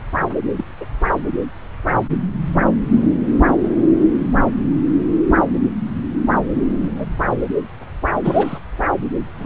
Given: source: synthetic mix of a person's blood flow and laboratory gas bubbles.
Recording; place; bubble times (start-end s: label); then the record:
Doppler ultrasound of blood flow; subclavian vein
0.56-0.64 s: bubbles
0.80-0.85 s: bubbles
6.81-6.89 s: bubbles
6.97-7.05 s: bubbles
8.24-8.59 s: bubbles
9.37-9.46 s: bubbles
From the record:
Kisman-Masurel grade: 122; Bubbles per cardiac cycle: 1 to 2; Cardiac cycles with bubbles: 10 to 50%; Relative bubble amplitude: moderate (0.250 to 0.450); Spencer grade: 2 (many but less than half of the cardiac periods contain bubble signals, singularly or in groups); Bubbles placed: anywhere in the cardiac cycle